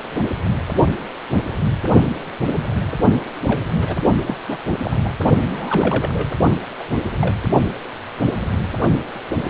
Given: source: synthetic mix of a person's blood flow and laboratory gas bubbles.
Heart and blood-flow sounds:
Doppler ultrasound of blood flow; precordium
3.42-3.61 s: bubbles
3.78-3.96 s: bubbles
4.26-4.36 s: bubbles
4.47-4.57 s: bubbles
4.83-4.97 s: bubbles
5.04-5.10 s: bubbles
5.45-6.26 s: bubbles
6.79-6.84 s: bubbles
6.88-6.99 s: bubbles
7.21-7.36 s: bubbles
From the record:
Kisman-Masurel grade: 232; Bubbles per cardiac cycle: several, 3 to 8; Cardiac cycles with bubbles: 50 to 99%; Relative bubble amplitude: moderate (0.250 to 0.450); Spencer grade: 3 (all of the cardiac periods contain showers or single bubble signals, but not dominating or overriding the cardiac motion signals); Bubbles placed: only in the low amplitude regions of the cardiac cycle

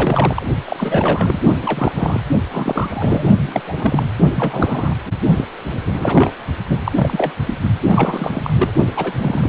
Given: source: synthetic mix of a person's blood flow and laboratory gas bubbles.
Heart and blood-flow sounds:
Doppler ultrasound of blood flow; precordium
0.00-0.47 s: bubbles
0.65-1.42 s: bubbles
1.62-1.93 s: bubbles
1.95-2.20 s: bubbles
2.51-3.29 s: bubbles
3.41-3.60 s: bubbles
3.66-4.05 s: bubbles
4.34-4.95 s: bubbles
5.36-5.44 s: bubbles
5.72-5.83 s: bubbles
5.85-6.33 s: bubbles
6.66-6.78 s: bubbles
6.84-6.92 s: bubbles
6.94-7.31 s: bubbles
7.46-7.54 s: bubbles
7.83-8.54 s: bubbles
8.59-8.73 s: bubbles
8.96-9.12 s: bubbles
9.18-9.49 s: bubbles
From the record:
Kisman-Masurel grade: 342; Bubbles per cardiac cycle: rolling drumbeat, 9 or more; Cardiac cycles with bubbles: 100%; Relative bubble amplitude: moderate (0.250 to 0.450); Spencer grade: 3 (all of the cardiac periods contain showers or single bubble signals, but not dominating or overriding the cardiac motion signals); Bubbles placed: only in the low amplitude regions of the cardiac cycle

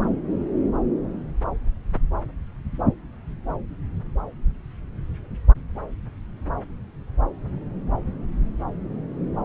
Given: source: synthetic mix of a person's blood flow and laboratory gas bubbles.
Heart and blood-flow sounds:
Doppler ultrasound of blood flow; subclavian vein
no bubbles
From the record:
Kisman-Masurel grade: 000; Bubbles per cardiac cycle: 0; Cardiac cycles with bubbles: 0%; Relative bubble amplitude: no bubbles discernible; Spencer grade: 0 (complete lack of bubble signals)

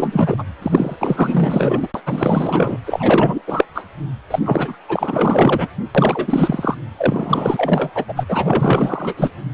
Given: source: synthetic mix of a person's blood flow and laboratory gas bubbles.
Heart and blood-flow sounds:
Doppler ultrasound of blood flow; precordium
0.00-0.43 s: bubbles
0.62-0.96 s: bubbles
0.99-1.88 s: bubbles
1.94-2.01 s: bubbles
2.06-2.77 s: bubbles
2.86-3.42 s: bubbles
3.47-3.65 s: bubbles
3.74-3.82 s: bubbles
4.31-4.39 s: bubbles
4.45-4.78 s: bubbles
4.88-5.68 s: bubbles
5.95-6.75 s: bubbles
6.97-7.90 s: bubbles
7.95-8.05 s: bubbles
8.08-8.25 s: bubbles
8.28-9.32 s: bubbles
From the record:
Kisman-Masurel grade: 444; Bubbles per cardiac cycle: continuous sound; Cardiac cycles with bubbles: 100%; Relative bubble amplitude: maximal (0.775 to 0.999); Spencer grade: 4 (maximum detectable bubble signal sounding continuously throughout systole and diastole of every cardiac period, and overriding the amplitude of the normal cardiac signals); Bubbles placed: anywhere in the cardiac cycle

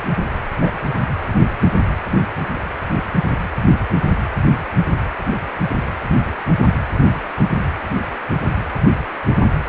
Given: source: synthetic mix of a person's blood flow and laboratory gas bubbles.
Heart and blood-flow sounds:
Doppler ultrasound of blood flow; precordium
0.61-0.70 s: bubbles
From the record:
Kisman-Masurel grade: 112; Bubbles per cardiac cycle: 1 to 2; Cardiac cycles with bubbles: 1 to 10%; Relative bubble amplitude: moderate (0.250 to 0.450); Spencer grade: 1 (occasional bubble signal discernible with the cardiac motion signal, with majority of cardiac periods free of bubbles); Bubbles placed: anywhere in the cardiac cycle

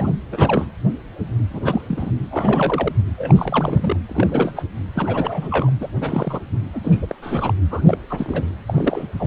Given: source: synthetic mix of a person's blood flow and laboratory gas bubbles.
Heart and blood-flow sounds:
Doppler ultrasound of blood flow; precordium
0.00-0.18 s: bubbles
0.31-0.66 s: bubbles
1.50-1.60 s: bubbles
1.64-1.81 s: bubbles
1.89-2.11 s: bubbles
2.31-2.92 s: bubbles
3.18-3.96 s: bubbles
4.09-4.53 s: bubbles
4.56-4.64 s: bubbles
4.94-5.70 s: bubbles
5.80-5.88 s: bubbles
6.00-6.40 s: bubbles
6.73-6.80 s: bubbles
6.83-7.15 s: bubbles
7.22-7.54 s: bubbles
7.71-7.82 s: bubbles
7.86-7.97 s: bubbles
8.10-8.48 s: bubbles
8.67-9.07 s: bubbles
9.19-9.26 s: bubbles
From the record:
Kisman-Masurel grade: 342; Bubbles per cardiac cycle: rolling drumbeat, 9 or more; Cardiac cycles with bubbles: 100%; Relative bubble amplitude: moderate (0.250 to 0.450); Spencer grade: 3 (all of the cardiac periods contain showers or single bubble signals, but not dominating or overriding the cardiac motion signals); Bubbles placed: anywhere in the cardiac cycle

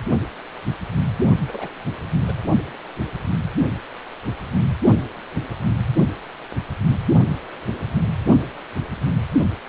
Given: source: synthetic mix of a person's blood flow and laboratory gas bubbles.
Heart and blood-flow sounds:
Doppler ultrasound of blood flow; precordium
1.47-1.69 s: bubbles
2.22-2.33 s: bubbles
From the record:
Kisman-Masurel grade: 211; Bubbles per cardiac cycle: several, 3 to 8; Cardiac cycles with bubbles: 1 to 10%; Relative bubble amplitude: barely perceptible (0.100 to 0.250); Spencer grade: 1 (occasional bubble signal discernible with the cardiac motion signal, with majority of cardiac periods free of bubbles); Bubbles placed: only in the low amplitude regions of the cardiac cycle

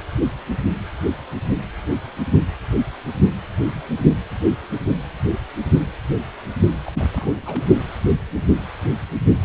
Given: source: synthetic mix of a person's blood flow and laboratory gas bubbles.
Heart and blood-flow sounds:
Doppler ultrasound of blood flow; precordium
6.83-6.92 s: bubbles
6.95-7.10 s: bubbles
7.14-7.65 s: bubbles
From the record:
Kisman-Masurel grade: 211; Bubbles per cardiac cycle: several, 3 to 8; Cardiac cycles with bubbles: 1 to 10%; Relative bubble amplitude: barely perceptible (0.100 to 0.250); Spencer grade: 1 (occasional bubble signal discernible with the cardiac motion signal, with majority of cardiac periods free of bubbles); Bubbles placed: only in the low amplitude regions of the cardiac cycle

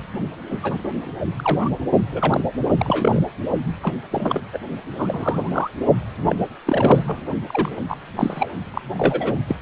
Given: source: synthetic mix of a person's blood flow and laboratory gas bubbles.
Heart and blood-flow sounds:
Doppler ultrasound of blood flow; precordium
0.51-0.59 s: bubbles
0.62-0.93 s: bubbles
1.38-1.69 s: bubbles
2.12-2.44 s: bubbles
2.77-3.23 s: bubbles
3.82-3.93 s: bubbles
4.11-4.41 s: bubbles
4.53-4.58 s: bubbles
4.98-5.69 s: bubbles
6.28-6.36 s: bubbles
6.66-7.04 s: bubbles
7.07-7.21 s: bubbles
7.47-7.82 s: bubbles
7.89-7.96 s: bubbles
8.16-8.51 s: bubbles
8.73-8.81 s: bubbles
8.95-9.35 s: bubbles
9.47-9.56 s: bubbles
From the record:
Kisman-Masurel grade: 242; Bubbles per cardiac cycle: several, 3 to 8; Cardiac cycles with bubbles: 100%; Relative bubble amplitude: moderate (0.250 to 0.450); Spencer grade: 3 (all of the cardiac periods contain showers or single bubble signals, but not dominating or overriding the cardiac motion signals); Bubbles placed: only in the low amplitude regions of the cardiac cycle

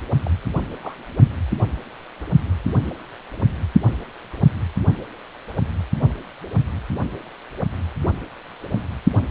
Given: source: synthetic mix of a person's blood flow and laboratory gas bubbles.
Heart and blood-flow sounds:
Doppler ultrasound of blood flow; precordium
0.25-0.28 s: bubbles
0.80-0.95 s: bubbles
9.14-9.20 s: bubbles
From the record:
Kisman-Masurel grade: 121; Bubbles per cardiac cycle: 1 to 2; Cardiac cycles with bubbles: 10 to 50%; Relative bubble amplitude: barely perceptible (0.100 to 0.250); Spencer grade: 2 (many but less than half of the cardiac periods contain bubble signals, singularly or in groups); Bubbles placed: only in the low amplitude regions of the cardiac cycle

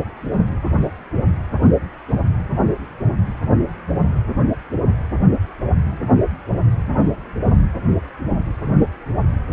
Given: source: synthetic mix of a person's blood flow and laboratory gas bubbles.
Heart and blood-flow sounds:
Doppler ultrasound of blood flow; precordium
no bubbles
From the record:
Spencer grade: 0 (complete lack of bubble signals)

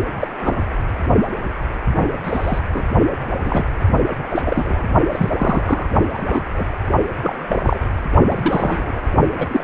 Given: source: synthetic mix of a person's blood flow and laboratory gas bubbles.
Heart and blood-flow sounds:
Doppler ultrasound of blood flow; precordium
0.20-0.28 s: bubbles
0.41-0.60 s: bubbles
1.95-2.12 s: bubbles
2.24-2.59 s: bubbles
2.71-2.82 s: bubbles
3.45-3.64 s: bubbles
4.35-4.42 s: bubbles
4.46-4.84 s: bubbles
5.12-5.29 s: bubbles
5.37-5.87 s: bubbles
6.13-6.45 s: bubbles
6.56-6.65 s: bubbles
7.21-7.79 s: bubbles
8.30-9.02 s: bubbles
9.38-9.64 s: bubbles
From the record:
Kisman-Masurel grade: 242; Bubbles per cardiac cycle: several, 3 to 8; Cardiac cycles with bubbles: 100%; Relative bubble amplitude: moderate (0.250 to 0.450); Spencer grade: 3 (all of the cardiac periods contain showers or single bubble signals, but not dominating or overriding the cardiac motion signals); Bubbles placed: only in the low amplitude regions of the cardiac cycle

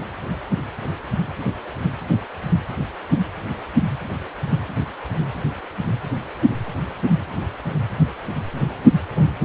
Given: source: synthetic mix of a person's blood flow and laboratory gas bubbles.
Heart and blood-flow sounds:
Doppler ultrasound of blood flow; precordium
no bubbles
From the record:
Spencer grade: 0 (complete lack of bubble signals)

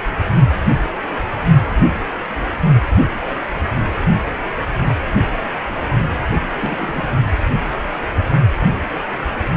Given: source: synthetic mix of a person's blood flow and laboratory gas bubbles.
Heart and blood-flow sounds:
Doppler ultrasound of blood flow; precordium
6.55-7.04 s: bubbles
From the record:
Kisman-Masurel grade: 211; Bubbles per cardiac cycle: several, 3 to 8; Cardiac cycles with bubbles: 1 to 10%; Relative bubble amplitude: barely perceptible (0.100 to 0.250); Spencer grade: 1 (occasional bubble signal discernible with the cardiac motion signal, with majority of cardiac periods free of bubbles); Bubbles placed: anywhere in the cardiac cycle

